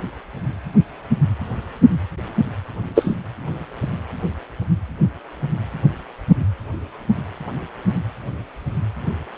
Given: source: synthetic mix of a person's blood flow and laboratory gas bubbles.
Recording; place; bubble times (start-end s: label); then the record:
Doppler ultrasound of blood flow; precordium
2.95-3.16 s: bubbles
From the record:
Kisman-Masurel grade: 113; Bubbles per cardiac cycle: 1 to 2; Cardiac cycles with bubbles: 1 to 10%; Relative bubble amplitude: loud (0.450 to 0.775); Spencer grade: 1 (occasional bubble signal discernible with the cardiac motion signal, with majority of cardiac periods free of bubbles); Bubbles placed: anywhere in the cardiac cycle